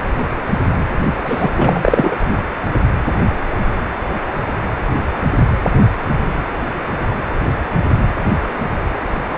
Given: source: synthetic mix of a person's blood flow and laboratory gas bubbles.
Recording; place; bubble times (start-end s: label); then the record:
Doppler ultrasound of blood flow; precordium
1.25-1.50 s: bubbles
1.55-2.17 s: bubbles
From the record:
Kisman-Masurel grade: 213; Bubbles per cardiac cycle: several, 3 to 8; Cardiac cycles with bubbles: 1 to 10%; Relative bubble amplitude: loud (0.450 to 0.775); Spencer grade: 1 (occasional bubble signal discernible with the cardiac motion signal, with majority of cardiac periods free of bubbles); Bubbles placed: anywhere in the cardiac cycle